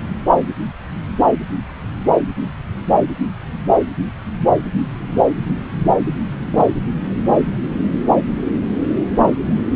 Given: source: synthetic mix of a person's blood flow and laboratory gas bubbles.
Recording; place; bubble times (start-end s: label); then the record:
Doppler ultrasound of blood flow; subclavian vein
6.51-6.66 s: bubbles
From the record:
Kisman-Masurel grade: 112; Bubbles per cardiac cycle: 1 to 2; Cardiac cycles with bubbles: 1 to 10%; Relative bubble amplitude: moderate (0.250 to 0.450); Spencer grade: 1 (occasional bubble signal discernible with the cardiac motion signal, with majority of cardiac periods free of bubbles); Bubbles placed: anywhere in the cardiac cycle